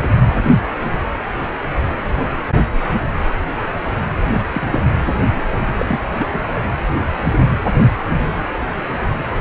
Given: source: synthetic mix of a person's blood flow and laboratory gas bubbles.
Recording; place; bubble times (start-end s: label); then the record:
Doppler ultrasound of blood flow; precordium
4.31-4.42 s: bubbles
4.52-4.68 s: bubbles
4.72-4.80 s: bubbles
5.34-5.42 s: bubbles
5.51-5.62 s: bubbles
5.77-5.85 s: bubbles
5.88-6.00 s: bubbles
6.17-6.27 s: bubbles
6.32-6.40 s: bubbles
6.54-6.65 s: bubbles
From the record:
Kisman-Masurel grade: 222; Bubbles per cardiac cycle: several, 3 to 8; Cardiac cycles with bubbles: 10 to 50%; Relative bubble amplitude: moderate (0.250 to 0.450); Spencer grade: 2 (many but less than half of the cardiac periods contain bubble signals, singularly or in groups); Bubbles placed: anywhere in the cardiac cycle